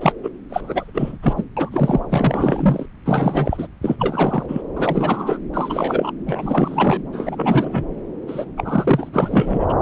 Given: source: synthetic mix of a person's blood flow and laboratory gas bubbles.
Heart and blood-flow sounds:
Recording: Doppler ultrasound of blood flow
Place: subclavian vein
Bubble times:
0.00-0.13 s: bubbles
0.22-0.30 s: bubbles
0.49-0.91 s: bubbles
0.94-1.18 s: bubbles
1.22-1.33 s: bubbles
1.36-1.44 s: bubbles
1.56-2.00 s: bubbles
2.09-2.86 s: bubbles
3.05-3.67 s: bubbles
3.82-4.62 s: bubbles
4.76-5.38 s: bubbles
5.54-6.12 s: bubbles
6.27-7.02 s: bubbles
7.12-7.86 s: bubbles
8.28-8.45 s: bubbles
8.57-9.09 s: bubbles
9.13-9.78 s: bubbles
From the record:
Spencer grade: 3 (all of the cardiac periods contain showers or single bubble signals, but not dominating or overriding the cardiac motion signals)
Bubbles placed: anywhere in the cardiac cycle

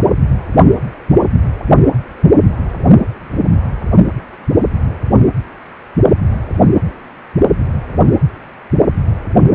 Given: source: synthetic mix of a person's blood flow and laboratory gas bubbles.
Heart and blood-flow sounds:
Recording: Doppler ultrasound of blood flow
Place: precordium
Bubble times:
no bubbles
From the record:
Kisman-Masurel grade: 000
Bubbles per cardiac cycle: 0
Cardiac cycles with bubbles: 0%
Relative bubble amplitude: no bubbles discernible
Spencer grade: 0 (complete lack of bubble signals)

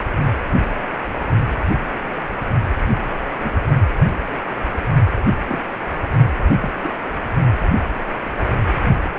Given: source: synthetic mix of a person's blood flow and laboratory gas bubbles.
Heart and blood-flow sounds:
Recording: Doppler ultrasound of blood flow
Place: precordium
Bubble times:
3.41-3.52 s: bubbles
5.48-5.58 s: bubbles
6.60-6.70 s: bubbles
6.81-6.90 s: bubbles
8.21-8.29 s: bubbles
From the record:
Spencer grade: 2 (many but less than half of the cardiac periods contain bubble signals, singularly or in groups)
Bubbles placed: anywhere in the cardiac cycle

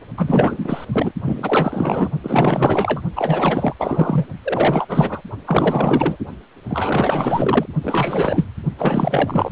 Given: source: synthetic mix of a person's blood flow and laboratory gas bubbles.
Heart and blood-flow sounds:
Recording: Doppler ultrasound of blood flow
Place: precordium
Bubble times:
0.16-0.85 s: bubbles
0.92-1.12 s: bubbles
1.25-2.09 s: bubbles
2.23-3.01 s: bubbles
3.15-3.73 s: bubbles
3.78-4.26 s: bubbles
4.44-5.22 s: bubbles
5.46-6.17 s: bubbles
6.68-7.66 s: bubbles
7.83-8.46 s: bubbles
8.78-9.52 s: bubbles
From the record:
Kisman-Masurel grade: 444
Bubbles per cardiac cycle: continuous sound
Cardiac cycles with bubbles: 100%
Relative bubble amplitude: maximal (0.775 to 0.999)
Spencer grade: 4 (maximum detectable bubble signal sounding continuously throughout systole and diastole of every cardiac period, and overriding the amplitude of the normal cardiac signals)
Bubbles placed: only in the low amplitude regions of the cardiac cycle

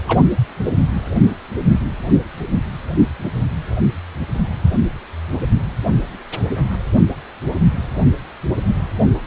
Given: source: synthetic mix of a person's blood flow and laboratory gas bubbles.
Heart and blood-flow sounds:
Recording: Doppler ultrasound of blood flow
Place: precordium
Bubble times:
0.08-0.21 s: bubbles
From the record:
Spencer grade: 1 (occasional bubble signal discernible with the cardiac motion signal, with majority of cardiac periods free of bubbles)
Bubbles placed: anywhere in the cardiac cycle

